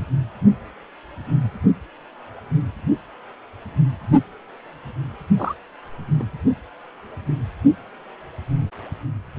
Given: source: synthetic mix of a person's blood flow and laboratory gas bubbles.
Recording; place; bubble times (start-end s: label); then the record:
Doppler ultrasound of blood flow; precordium
5.37-5.54 s: bubbles
6.19-6.23 s: bubbles
From the record:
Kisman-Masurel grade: 112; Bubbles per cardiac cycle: 1 to 2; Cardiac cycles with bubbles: 1 to 10%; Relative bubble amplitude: moderate (0.250 to 0.450); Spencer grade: 1 (occasional bubble signal discernible with the cardiac motion signal, with majority of cardiac periods free of bubbles); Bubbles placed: anywhere in the cardiac cycle